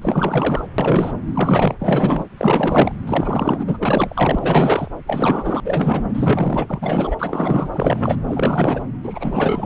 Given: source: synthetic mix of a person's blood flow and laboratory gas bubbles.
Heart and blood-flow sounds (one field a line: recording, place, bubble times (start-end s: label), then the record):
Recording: Doppler ultrasound of blood flow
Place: subclavian vein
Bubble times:
0.02-0.65 s: bubbles
0.78-1.14 s: bubbles
1.27-1.76 s: bubbles
1.79-2.25 s: bubbles
2.38-2.92 s: bubbles
3.07-3.79 s: bubbles
3.81-4.88 s: bubbles
5.07-5.60 s: bubbles
5.64-6.04 s: bubbles
6.14-7.16 s: bubbles
7.18-8.17 s: bubbles
8.28-8.83 s: bubbles
9.03-9.66 s: bubbles
From the record:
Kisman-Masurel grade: 444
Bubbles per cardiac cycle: continuous sound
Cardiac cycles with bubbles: 100%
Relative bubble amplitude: maximal (0.775 to 0.999)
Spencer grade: 4 (maximum detectable bubble signal sounding continuously throughout systole and diastole of every cardiac period, and overriding the amplitude of the normal cardiac signals)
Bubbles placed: anywhere in the cardiac cycle